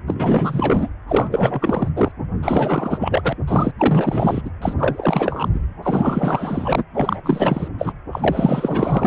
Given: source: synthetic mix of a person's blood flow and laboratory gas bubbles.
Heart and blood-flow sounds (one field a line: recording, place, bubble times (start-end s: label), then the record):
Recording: Doppler ultrasound of blood flow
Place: precordium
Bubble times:
0.07-0.89 s: bubbles
1.07-1.89 s: bubbles
1.95-2.12 s: bubbles
2.42-3.37 s: bubbles
3.48-3.72 s: bubbles
3.78-4.42 s: bubbles
4.44-4.50 s: bubbles
4.61-4.74 s: bubbles
4.77-5.48 s: bubbles
5.52-5.60 s: bubbles
5.82-6.84 s: bubbles
6.94-7.20 s: bubbles
7.22-7.68 s: bubbles
7.78-7.92 s: bubbles
8.12-9.07 s: bubbles
From the record:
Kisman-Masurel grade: 444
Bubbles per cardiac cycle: continuous sound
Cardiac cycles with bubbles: 100%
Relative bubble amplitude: maximal (0.775 to 0.999)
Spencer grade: 4 (maximum detectable bubble signal sounding continuously throughout systole and diastole of every cardiac period, and overriding the amplitude of the normal cardiac signals)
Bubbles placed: anywhere in the cardiac cycle